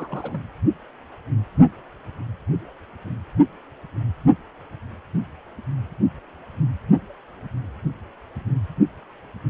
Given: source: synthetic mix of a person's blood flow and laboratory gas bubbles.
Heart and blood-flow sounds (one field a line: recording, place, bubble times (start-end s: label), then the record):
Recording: Doppler ultrasound of blood flow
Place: precordium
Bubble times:
0.00-0.41 s: bubbles
From the record:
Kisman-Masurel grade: 221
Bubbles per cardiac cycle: several, 3 to 8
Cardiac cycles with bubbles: 10 to 50%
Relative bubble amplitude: barely perceptible (0.100 to 0.250)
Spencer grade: 2 (many but less than half of the cardiac periods contain bubble signals, singularly or in groups)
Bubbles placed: only in the low amplitude regions of the cardiac cycle